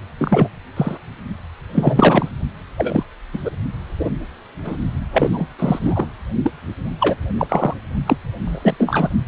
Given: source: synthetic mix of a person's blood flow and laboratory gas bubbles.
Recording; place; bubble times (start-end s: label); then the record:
Doppler ultrasound of blood flow; precordium
0.19-0.48 s: bubbles
0.76-0.98 s: bubbles
1.74-2.29 s: bubbles
2.78-3.04 s: bubbles
3.33-3.38 s: bubbles
3.45-3.50 s: bubbles
3.99-4.10 s: bubbles
4.64-4.77 s: bubbles
5.12-5.47 s: bubbles
5.58-6.09 s: bubbles
6.43-6.51 s: bubbles
7.00-7.15 s: bubbles
7.38-7.74 s: bubbles
8.07-8.16 s: bubbles
8.41-9.09 s: bubbles
From the record:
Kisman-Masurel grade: 243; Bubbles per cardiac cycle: several, 3 to 8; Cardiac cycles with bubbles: 100%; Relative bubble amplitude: loud (0.450 to 0.775); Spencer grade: 3 (all of the cardiac periods contain showers or single bubble signals, but not dominating or overriding the cardiac motion signals); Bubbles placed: only in the low amplitude regions of the cardiac cycle